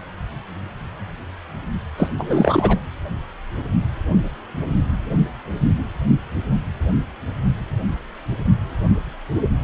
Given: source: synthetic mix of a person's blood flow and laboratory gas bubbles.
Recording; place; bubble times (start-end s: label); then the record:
Doppler ultrasound of blood flow; precordium
1.97-2.08 s: bubbles
2.17-2.79 s: bubbles
From the record:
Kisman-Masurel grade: 222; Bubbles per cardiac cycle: several, 3 to 8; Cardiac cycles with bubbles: 10 to 50%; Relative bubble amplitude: moderate (0.250 to 0.450); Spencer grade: 2 (many but less than half of the cardiac periods contain bubble signals, singularly or in groups); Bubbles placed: anywhere in the cardiac cycle